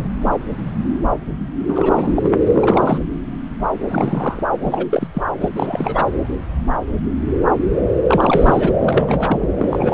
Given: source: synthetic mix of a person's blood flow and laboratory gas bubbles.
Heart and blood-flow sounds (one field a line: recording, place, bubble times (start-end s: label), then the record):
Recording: Doppler ultrasound of blood flow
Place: subclavian vein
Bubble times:
0.00-0.08 s: bubbles
1.67-2.32 s: bubbles
2.46-2.98 s: bubbles
3.88-4.42 s: bubbles
4.61-4.85 s: bubbles
4.90-5.08 s: bubbles
5.14-5.23 s: bubbles
5.40-5.49 s: bubbles
5.56-6.06 s: bubbles
8.07-8.71 s: bubbles
8.79-9.47 s: bubbles
9.58-9.93 s: bubbles
From the record:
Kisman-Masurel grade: 332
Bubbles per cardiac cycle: rolling drumbeat, 9 or more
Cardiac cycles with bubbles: 50 to 99%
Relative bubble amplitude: moderate (0.250 to 0.450)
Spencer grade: 3 (all of the cardiac periods contain showers or single bubble signals, but not dominating or overriding the cardiac motion signals)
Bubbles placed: anywhere in the cardiac cycle